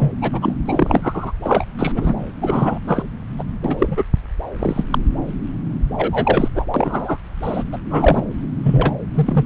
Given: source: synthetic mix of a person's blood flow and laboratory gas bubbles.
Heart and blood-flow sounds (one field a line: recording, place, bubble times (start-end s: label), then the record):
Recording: Doppler ultrasound of blood flow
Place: subclavian vein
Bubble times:
0.00-0.13 s: bubbles
0.21-0.53 s: bubbles
0.65-1.33 s: bubbles
1.44-1.65 s: bubbles
1.79-1.92 s: bubbles
1.94-2.15 s: bubbles
2.42-2.78 s: bubbles
2.87-3.03 s: bubbles
3.38-3.44 s: bubbles
3.64-4.04 s: bubbles
4.59-4.85 s: bubbles
4.91-4.99 s: bubbles
5.98-6.48 s: bubbles
6.54-6.67 s: bubbles
6.74-7.17 s: bubbles
7.42-7.64 s: bubbles
7.72-7.78 s: bubbles
7.90-8.24 s: bubbles
8.63-8.93 s: bubbles
9.14-9.45 s: bubbles
From the record:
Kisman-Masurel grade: 233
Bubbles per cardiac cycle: several, 3 to 8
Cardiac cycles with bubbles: 50 to 99%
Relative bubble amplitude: loud (0.450 to 0.775)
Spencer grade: 3 (all of the cardiac periods contain showers or single bubble signals, but not dominating or overriding the cardiac motion signals)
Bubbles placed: anywhere in the cardiac cycle